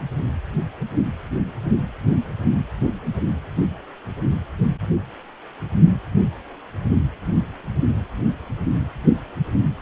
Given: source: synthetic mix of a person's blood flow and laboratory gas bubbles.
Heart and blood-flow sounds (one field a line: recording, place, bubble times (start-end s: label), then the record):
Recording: Doppler ultrasound of blood flow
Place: precordium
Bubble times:
no bubbles
From the record:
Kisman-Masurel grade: 000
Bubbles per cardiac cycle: 0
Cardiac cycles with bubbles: 0%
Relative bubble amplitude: no bubbles discernible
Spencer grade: 0 (complete lack of bubble signals)